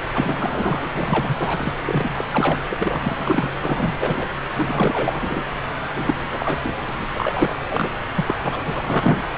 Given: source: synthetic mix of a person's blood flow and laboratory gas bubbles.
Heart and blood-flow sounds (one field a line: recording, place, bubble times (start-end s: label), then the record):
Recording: Doppler ultrasound of blood flow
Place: subclavian vein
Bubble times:
0.14-0.90 s: bubbles
0.93-1.72 s: bubbles
1.85-2.13 s: bubbles
2.16-2.25 s: bubbles
2.31-2.60 s: bubbles
2.69-3.50 s: bubbles
3.61-4.26 s: bubbles
4.55-5.43 s: bubbles
5.94-6.58 s: bubbles
6.63-6.80 s: bubbles
6.88-7.05 s: bubbles
7.14-7.57 s: bubbles
7.71-7.91 s: bubbles
8.16-8.34 s: bubbles
8.42-8.63 s: bubbles
8.66-9.22 s: bubbles
From the record:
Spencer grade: 3 (all of the cardiac periods contain showers or single bubble signals, but not dominating or overriding the cardiac motion signals)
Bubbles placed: anywhere in the cardiac cycle